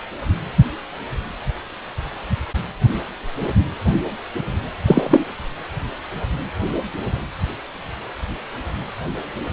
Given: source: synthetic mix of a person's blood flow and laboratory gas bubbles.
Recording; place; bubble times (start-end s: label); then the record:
Doppler ultrasound of blood flow; precordium
4.86-5.24 s: bubbles
From the record:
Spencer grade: 1 (occasional bubble signal discernible with the cardiac motion signal, with majority of cardiac periods free of bubbles); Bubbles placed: anywhere in the cardiac cycle